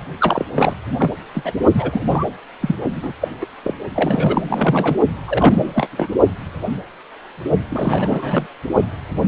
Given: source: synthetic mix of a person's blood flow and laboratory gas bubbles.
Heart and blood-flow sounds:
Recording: Doppler ultrasound of blood flow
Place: precordium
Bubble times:
0.21-0.46 s: bubbles
0.54-0.73 s: bubbles
0.98-1.11 s: bubbles
1.33-1.53 s: bubbles
1.74-2.04 s: bubbles
2.10-2.26 s: bubbles
2.61-2.76 s: bubbles
2.95-3.12 s: bubbles
3.21-3.28 s: bubbles
3.41-3.47 s: bubbles
3.64-3.74 s: bubbles
3.95-4.97 s: bubbles
5.28-5.88 s: bubbles
5.92-6.08 s: bubbles
7.70-8.46 s: bubbles
From the record:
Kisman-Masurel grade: 332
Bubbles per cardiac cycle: rolling drumbeat, 9 or more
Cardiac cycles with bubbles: 50 to 99%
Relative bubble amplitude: moderate (0.250 to 0.450)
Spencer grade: 3 (all of the cardiac periods contain showers or single bubble signals, but not dominating or overriding the cardiac motion signals)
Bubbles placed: only in the low amplitude regions of the cardiac cycle

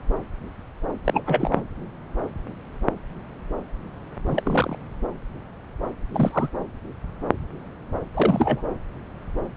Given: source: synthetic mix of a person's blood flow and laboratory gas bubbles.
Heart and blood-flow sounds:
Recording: Doppler ultrasound of blood flow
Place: subclavian vein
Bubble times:
1.04-1.22 s: bubbles
1.26-1.67 s: bubbles
4.25-4.79 s: bubbles
6.13-6.50 s: bubbles
8.13-8.62 s: bubbles
From the record:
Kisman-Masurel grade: 222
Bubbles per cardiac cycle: several, 3 to 8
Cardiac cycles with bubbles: 10 to 50%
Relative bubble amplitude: moderate (0.250 to 0.450)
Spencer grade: 2 (many but less than half of the cardiac periods contain bubble signals, singularly or in groups)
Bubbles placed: anywhere in the cardiac cycle

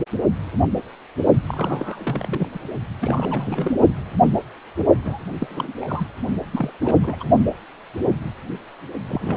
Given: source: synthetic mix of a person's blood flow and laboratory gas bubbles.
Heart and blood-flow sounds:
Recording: Doppler ultrasound of blood flow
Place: precordium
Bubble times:
1.47-2.48 s: bubbles
2.53-2.59 s: bubbles
3.00-3.73 s: bubbles
5.05-5.20 s: bubbles
5.39-5.47 s: bubbles
5.50-5.73 s: bubbles
5.77-6.07 s: bubbles
6.52-6.71 s: bubbles
6.81-7.17 s: bubbles
7.20-7.24 s: bubbles
9.08-9.37 s: bubbles
From the record:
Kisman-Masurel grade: 332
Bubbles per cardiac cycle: rolling drumbeat, 9 or more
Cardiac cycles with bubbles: 50 to 99%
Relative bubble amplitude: moderate (0.250 to 0.450)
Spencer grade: 3 (all of the cardiac periods contain showers or single bubble signals, but not dominating or overriding the cardiac motion signals)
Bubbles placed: only in the low amplitude regions of the cardiac cycle

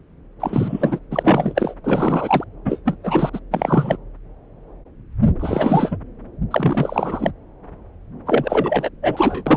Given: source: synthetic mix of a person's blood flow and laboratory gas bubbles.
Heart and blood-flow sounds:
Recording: Doppler ultrasound of blood flow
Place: subclavian vein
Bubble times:
0.40-0.99 s: bubbles
1.10-1.75 s: bubbles
1.83-2.44 s: bubbles
2.65-2.80 s: bubbles
2.85-2.97 s: bubbles
3.03-3.30 s: bubbles
3.33-3.40 s: bubbles
3.50-3.97 s: bubbles
5.39-5.96 s: bubbles
6.50-7.32 s: bubbles
8.26-8.89 s: bubbles
9.03-9.44 s: bubbles
9.46-9.57 s: bubbles
From the record:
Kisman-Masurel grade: 333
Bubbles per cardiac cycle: rolling drumbeat, 9 or more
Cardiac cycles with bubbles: 50 to 99%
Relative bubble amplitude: loud (0.450 to 0.775)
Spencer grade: 3 (all of the cardiac periods contain showers or single bubble signals, but not dominating or overriding the cardiac motion signals)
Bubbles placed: anywhere in the cardiac cycle

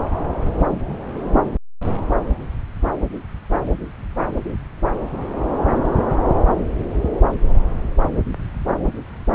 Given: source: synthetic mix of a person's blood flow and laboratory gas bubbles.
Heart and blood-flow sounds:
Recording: Doppler ultrasound of blood flow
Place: subclavian vein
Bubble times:
no bubbles
From the record:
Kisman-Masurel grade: 000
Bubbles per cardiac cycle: 0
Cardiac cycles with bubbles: 0%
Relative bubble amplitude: no bubbles discernible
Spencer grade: 0 (complete lack of bubble signals)

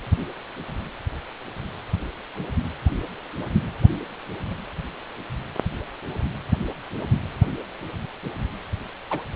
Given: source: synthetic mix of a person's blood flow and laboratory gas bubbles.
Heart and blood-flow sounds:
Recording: Doppler ultrasound of blood flow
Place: precordium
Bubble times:
9.10-9.23 s: bubbles
From the record:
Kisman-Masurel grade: 111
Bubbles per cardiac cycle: 1 to 2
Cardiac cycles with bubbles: 1 to 10%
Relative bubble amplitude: barely perceptible (0.100 to 0.250)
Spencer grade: 1 (occasional bubble signal discernible with the cardiac motion signal, with majority of cardiac periods free of bubbles)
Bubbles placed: anywhere in the cardiac cycle

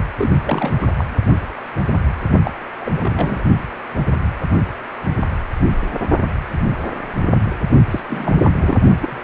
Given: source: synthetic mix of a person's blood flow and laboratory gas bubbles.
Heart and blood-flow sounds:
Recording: Doppler ultrasound of blood flow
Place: precordium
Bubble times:
0.18-0.73 s: bubbles
0.81-0.88 s: bubbles
0.98-1.04 s: bubbles
2.45-2.51 s: bubbles
2.80-3.45 s: bubbles
7.90-8.00 s: bubbles
8.08-8.78 s: bubbles
9.02-9.21 s: bubbles
From the record:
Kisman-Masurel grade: 332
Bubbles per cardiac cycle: rolling drumbeat, 9 or more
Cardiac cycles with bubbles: 50 to 99%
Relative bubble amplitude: moderate (0.250 to 0.450)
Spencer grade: 3 (all of the cardiac periods contain showers or single bubble signals, but not dominating or overriding the cardiac motion signals)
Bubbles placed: only in the low amplitude regions of the cardiac cycle

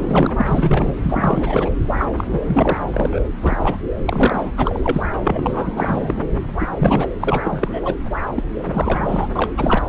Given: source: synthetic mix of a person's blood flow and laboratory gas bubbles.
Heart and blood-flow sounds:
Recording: Doppler ultrasound of blood flow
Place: subclavian vein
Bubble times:
0.00-0.94 s: bubbles
1.02-1.71 s: bubbles
1.97-2.05 s: bubbles
2.16-2.27 s: bubbles
2.31-2.40 s: bubbles
2.46-3.20 s: bubbles
3.42-3.78 s: bubbles
4.05-4.51 s: bubbles
4.57-4.79 s: bubbles
4.83-5.02 s: bubbles
5.12-5.19 s: bubbles
5.23-5.71 s: bubbles
5.76-6.27 s: bubbles
6.59-6.67 s: bubbles
6.71-7.10 s: bubbles
7.20-7.94 s: bubbles
8.35-8.43 s: bubbles
8.59-9.28 s: bubbles
9.35-9.51 s: bubbles
9.57-9.83 s: bubbles
From the record:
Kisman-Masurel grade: 342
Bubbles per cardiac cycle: rolling drumbeat, 9 or more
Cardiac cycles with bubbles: 100%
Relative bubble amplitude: moderate (0.250 to 0.450)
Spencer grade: 3 (all of the cardiac periods contain showers or single bubble signals, but not dominating or overriding the cardiac motion signals)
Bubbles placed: anywhere in the cardiac cycle

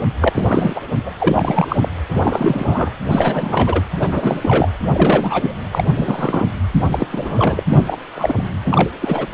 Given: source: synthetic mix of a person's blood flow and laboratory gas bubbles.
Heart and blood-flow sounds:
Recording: Doppler ultrasound of blood flow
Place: precordium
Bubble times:
0.20-0.30 s: bubbles
0.34-0.80 s: bubbles
1.06-1.10 s: bubbles
1.19-1.76 s: bubbles
1.80-1.89 s: bubbles
2.08-2.92 s: bubbles
3.10-3.84 s: bubbles
4.00-4.08 s: bubbles
4.11-4.39 s: bubbles
4.42-4.69 s: bubbles
4.85-5.55 s: bubbles
5.72-6.46 s: bubbles
6.92-7.07 s: bubbles
7.12-7.64 s: bubbles
7.70-7.97 s: bubbles
8.15-8.47 s: bubbles
8.64-8.90 s: bubbles
9.01-9.27 s: bubbles
9.29-9.34 s: bubbles
From the record:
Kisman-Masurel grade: 343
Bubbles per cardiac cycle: rolling drumbeat, 9 or more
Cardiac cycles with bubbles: 100%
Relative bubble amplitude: loud (0.450 to 0.775)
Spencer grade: 3 (all of the cardiac periods contain showers or single bubble signals, but not dominating or overriding the cardiac motion signals)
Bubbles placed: anywhere in the cardiac cycle

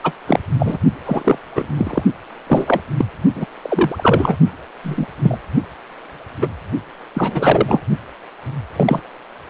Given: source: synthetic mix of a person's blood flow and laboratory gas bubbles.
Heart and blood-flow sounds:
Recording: Doppler ultrasound of blood flow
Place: precordium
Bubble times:
0.03-0.13 s: bubbles
0.27-0.39 s: bubbles
0.58-0.78 s: bubbles
1.06-1.38 s: bubbles
1.55-1.68 s: bubbles
1.77-2.03 s: bubbles
2.47-2.82 s: bubbles
2.98-3.05 s: bubbles
3.35-3.46 s: bubbles
3.62-4.37 s: bubbles
4.83-5.07 s: bubbles
5.23-5.38 s: bubbles
6.41-6.49 s: bubbles
7.14-7.82 s: bubbles
8.76-9.00 s: bubbles
From the record:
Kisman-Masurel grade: 243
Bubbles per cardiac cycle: several, 3 to 8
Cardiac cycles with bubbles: 100%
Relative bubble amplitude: loud (0.450 to 0.775)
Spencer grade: 3 (all of the cardiac periods contain showers or single bubble signals, but not dominating or overriding the cardiac motion signals)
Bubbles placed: only in the low amplitude regions of the cardiac cycle

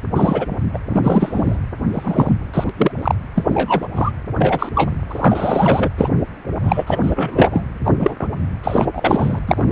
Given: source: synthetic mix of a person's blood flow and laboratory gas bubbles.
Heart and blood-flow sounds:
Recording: Doppler ultrasound of blood flow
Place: precordium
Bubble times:
0.15-0.46 s: bubbles
0.73-0.78 s: bubbles
0.90-1.57 s: bubbles
1.94-2.33 s: bubbles
2.54-2.65 s: bubbles
2.77-2.92 s: bubbles
3.02-3.15 s: bubbles
3.35-3.44 s: bubbles
3.50-3.87 s: bubbles
3.96-4.11 s: bubbles
4.38-4.69 s: bubbles
4.75-4.91 s: bubbles
5.11-5.90 s: bubbles
5.97-6.09 s: bubbles
6.59-6.83 s: bubbles
6.87-6.99 s: bubbles
7.03-7.64 s: bubbles
7.84-7.92 s: bubbles
8.00-8.14 s: bubbles
8.20-8.27 s: bubbles
8.63-8.85 s: bubbles
8.94-9.39 s: bubbles
9.47-9.72 s: bubbles
From the record:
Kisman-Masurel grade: 243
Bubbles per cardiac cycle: several, 3 to 8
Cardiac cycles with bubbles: 100%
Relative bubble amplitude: loud (0.450 to 0.775)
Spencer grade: 3 (all of the cardiac periods contain showers or single bubble signals, but not dominating or overriding the cardiac motion signals)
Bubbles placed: anywhere in the cardiac cycle

